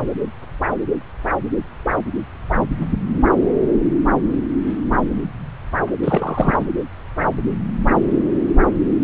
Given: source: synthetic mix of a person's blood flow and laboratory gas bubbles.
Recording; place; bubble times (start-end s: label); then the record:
Doppler ultrasound of blood flow; subclavian vein
6.02-6.66 s: bubbles
From the record:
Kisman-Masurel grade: 212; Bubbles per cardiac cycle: several, 3 to 8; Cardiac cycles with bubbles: 1 to 10%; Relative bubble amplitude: moderate (0.250 to 0.450); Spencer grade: 1 (occasional bubble signal discernible with the cardiac motion signal, with majority of cardiac periods free of bubbles); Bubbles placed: anywhere in the cardiac cycle